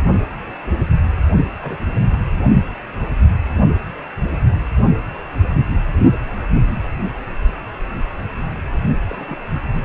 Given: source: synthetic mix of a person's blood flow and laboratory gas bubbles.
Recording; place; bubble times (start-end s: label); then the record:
Doppler ultrasound of blood flow; precordium
1.62-1.80 s: bubbles
2.06-2.19 s: bubbles
9.08-9.37 s: bubbles
9.73-9.85 s: bubbles
From the record:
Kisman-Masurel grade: 221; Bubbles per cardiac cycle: several, 3 to 8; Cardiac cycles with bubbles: 10 to 50%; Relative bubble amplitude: barely perceptible (0.100 to 0.250); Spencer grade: 2 (many but less than half of the cardiac periods contain bubble signals, singularly or in groups); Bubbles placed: only in the low amplitude regions of the cardiac cycle